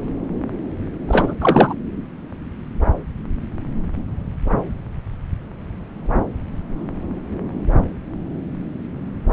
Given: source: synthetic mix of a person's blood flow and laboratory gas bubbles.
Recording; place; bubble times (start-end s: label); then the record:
Doppler ultrasound of blood flow; subclavian vein
1.08-1.34 s: bubbles
1.41-1.74 s: bubbles
From the record:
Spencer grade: 1 (occasional bubble signal discernible with the cardiac motion signal, with majority of cardiac periods free of bubbles); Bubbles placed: anywhere in the cardiac cycle